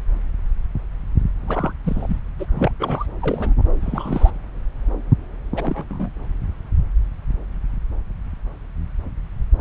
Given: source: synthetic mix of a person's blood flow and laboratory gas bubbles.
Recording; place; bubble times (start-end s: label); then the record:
Doppler ultrasound of blood flow; subclavian vein
1.48-1.73 s: bubbles
1.83-2.19 s: bubbles
2.39-2.46 s: bubbles
2.53-2.71 s: bubbles
2.79-3.06 s: bubbles
3.20-3.54 s: bubbles
3.81-4.31 s: bubbles
5.56-5.84 s: bubbles
5.88-6.09 s: bubbles
9.58-9.61 s: bubbles
From the record:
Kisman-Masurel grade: 222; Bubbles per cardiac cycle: several, 3 to 8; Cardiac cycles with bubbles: 10 to 50%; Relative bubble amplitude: moderate (0.250 to 0.450); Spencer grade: 2 (many but less than half of the cardiac periods contain bubble signals, singularly or in groups); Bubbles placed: anywhere in the cardiac cycle